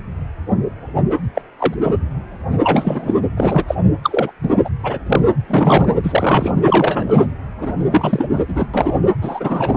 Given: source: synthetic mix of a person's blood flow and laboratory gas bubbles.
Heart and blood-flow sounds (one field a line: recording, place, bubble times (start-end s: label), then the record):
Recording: Doppler ultrasound of blood flow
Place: precordium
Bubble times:
1.34-1.42 s: bubbles
1.58-1.74 s: bubbles
1.80-1.97 s: bubbles
2.63-3.20 s: bubbles
3.36-3.65 s: bubbles
3.67-3.75 s: bubbles
4.03-4.32 s: bubbles
4.43-4.49 s: bubbles
4.64-4.69 s: bubbles
4.83-4.99 s: bubbles
5.06-5.22 s: bubbles
5.48-5.96 s: bubbles
6.04-6.53 s: bubbles
6.64-7.27 s: bubbles
7.61-7.73 s: bubbles
7.90-8.27 s: bubbles
8.33-8.43 s: bubbles
8.47-8.66 s: bubbles
8.73-8.99 s: bubbles
9.21-9.77 s: bubbles
From the record:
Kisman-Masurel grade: 233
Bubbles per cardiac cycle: several, 3 to 8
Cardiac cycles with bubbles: 50 to 99%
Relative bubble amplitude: loud (0.450 to 0.775)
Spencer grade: 3 (all of the cardiac periods contain showers or single bubble signals, but not dominating or overriding the cardiac motion signals)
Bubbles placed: anywhere in the cardiac cycle